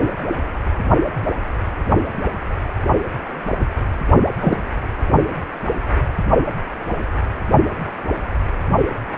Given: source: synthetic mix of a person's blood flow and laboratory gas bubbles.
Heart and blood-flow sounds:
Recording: Doppler ultrasound of blood flow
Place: precordium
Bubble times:
4.41-4.58 s: bubbles
From the record:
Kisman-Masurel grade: 113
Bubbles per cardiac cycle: 1 to 2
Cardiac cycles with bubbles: 1 to 10%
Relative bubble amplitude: loud (0.450 to 0.775)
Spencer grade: 1 (occasional bubble signal discernible with the cardiac motion signal, with majority of cardiac periods free of bubbles)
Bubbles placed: only in the low amplitude regions of the cardiac cycle

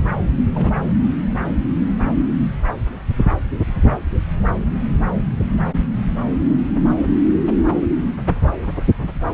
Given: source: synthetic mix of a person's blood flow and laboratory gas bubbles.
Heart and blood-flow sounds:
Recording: Doppler ultrasound of blood flow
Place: subclavian vein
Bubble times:
0.36-0.44 s: bubbles
0.55-0.82 s: bubbles
From the record:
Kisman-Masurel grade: 211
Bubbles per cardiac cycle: several, 3 to 8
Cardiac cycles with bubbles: 1 to 10%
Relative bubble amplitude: barely perceptible (0.100 to 0.250)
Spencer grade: 1 (occasional bubble signal discernible with the cardiac motion signal, with majority of cardiac periods free of bubbles)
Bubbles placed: anywhere in the cardiac cycle

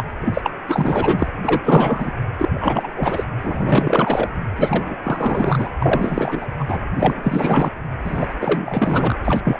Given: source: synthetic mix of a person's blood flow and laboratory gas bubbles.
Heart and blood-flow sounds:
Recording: Doppler ultrasound of blood flow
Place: precordium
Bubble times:
0.00-0.12 s: bubbles
0.21-0.54 s: bubbles
0.68-1.29 s: bubbles
1.43-1.60 s: bubbles
1.64-2.12 s: bubbles
2.38-2.50 s: bubbles
2.54-2.92 s: bubbles
2.96-3.25 s: bubbles
3.41-4.30 s: bubbles
4.57-4.96 s: bubbles
5.03-5.70 s: bubbles
5.79-6.46 s: bubbles
6.59-6.65 s: bubbles
6.68-6.79 s: bubbles
6.95-7.70 s: bubbles
8.04-8.34 s: bubbles
8.40-9.20 s: bubbles
9.24-9.60 s: bubbles
From the record:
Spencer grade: 4 (maximum detectable bubble signal sounding continuously throughout systole and diastole of every cardiac period, and overriding the amplitude of the normal cardiac signals)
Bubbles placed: anywhere in the cardiac cycle

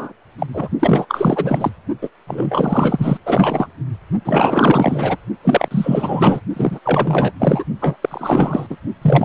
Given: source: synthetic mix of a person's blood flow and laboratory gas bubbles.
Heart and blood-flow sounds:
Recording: Doppler ultrasound of blood flow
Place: precordium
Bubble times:
0.00-0.12 s: bubbles
0.38-0.47 s: bubbles
0.53-0.69 s: bubbles
0.79-1.06 s: bubbles
1.08-1.71 s: bubbles
2.02-2.09 s: bubbles
2.27-3.17 s: bubbles
3.25-3.67 s: bubbles
4.25-5.17 s: bubbles
5.44-6.40 s: bubbles
6.56-6.80 s: bubbles
6.84-7.32 s: bubbles
7.39-7.65 s: bubbles
7.80-7.96 s: bubbles
8.02-8.76 s: bubbles
9.02-9.25 s: bubbles
From the record:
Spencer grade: 4 (maximum detectable bubble signal sounding continuously throughout systole and diastole of every cardiac period, and overriding the amplitude of the normal cardiac signals)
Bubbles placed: only in the low amplitude regions of the cardiac cycle

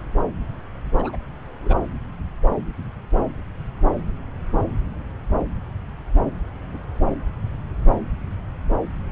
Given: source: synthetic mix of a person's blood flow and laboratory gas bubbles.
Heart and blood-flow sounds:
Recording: Doppler ultrasound of blood flow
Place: subclavian vein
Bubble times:
0.98-1.17 s: bubbles
1.62-1.77 s: bubbles
3.17-3.29 s: bubbles
6.74-6.78 s: bubbles
From the record:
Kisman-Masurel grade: 121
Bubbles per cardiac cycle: 1 to 2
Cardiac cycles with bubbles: 10 to 50%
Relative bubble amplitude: barely perceptible (0.100 to 0.250)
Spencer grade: 2 (many but less than half of the cardiac periods contain bubble signals, singularly or in groups)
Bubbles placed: anywhere in the cardiac cycle

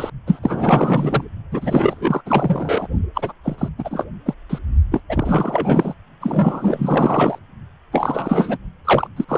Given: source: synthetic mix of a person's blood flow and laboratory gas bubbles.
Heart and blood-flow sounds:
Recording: Doppler ultrasound of blood flow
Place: precordium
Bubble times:
0.00-0.10 s: bubbles
0.27-0.40 s: bubbles
0.43-1.24 s: bubbles
1.51-2.22 s: bubbles
2.25-2.88 s: bubbles
3.14-3.33 s: bubbles
3.43-3.68 s: bubbles
3.78-4.04 s: bubbles
4.25-4.34 s: bubbles
4.49-4.58 s: bubbles
4.91-5.00 s: bubbles
5.09-5.94 s: bubbles
6.21-7.38 s: bubbles
7.92-8.58 s: bubbles
8.85-9.08 s: bubbles
9.16-9.25 s: bubbles
9.29-9.38 s: bubbles
From the record:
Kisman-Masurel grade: 444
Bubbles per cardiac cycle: continuous sound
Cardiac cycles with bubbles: 100%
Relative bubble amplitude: maximal (0.775 to 0.999)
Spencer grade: 4 (maximum detectable bubble signal sounding continuously throughout systole and diastole of every cardiac period, and overriding the amplitude of the normal cardiac signals)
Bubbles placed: only in the low amplitude regions of the cardiac cycle

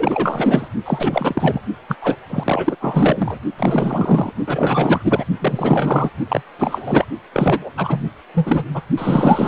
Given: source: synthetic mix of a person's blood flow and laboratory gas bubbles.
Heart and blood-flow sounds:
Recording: Doppler ultrasound of blood flow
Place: precordium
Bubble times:
0.00-0.68 s: bubbles
0.85-1.61 s: bubbles
1.89-1.96 s: bubbles
2.01-2.16 s: bubbles
2.29-2.76 s: bubbles
2.80-3.38 s: bubbles
3.58-4.32 s: bubbles
4.46-5.24 s: bubbles
5.39-6.10 s: bubbles
6.29-6.42 s: bubbles
6.58-7.05 s: bubbles
7.33-7.71 s: bubbles
7.77-8.11 s: bubbles
8.34-8.64 s: bubbles
8.74-8.82 s: bubbles
8.97-9.48 s: bubbles
From the record:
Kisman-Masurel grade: 444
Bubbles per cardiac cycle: continuous sound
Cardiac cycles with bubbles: 100%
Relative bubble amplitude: maximal (0.775 to 0.999)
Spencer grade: 4 (maximum detectable bubble signal sounding continuously throughout systole and diastole of every cardiac period, and overriding the amplitude of the normal cardiac signals)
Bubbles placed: only in the low amplitude regions of the cardiac cycle

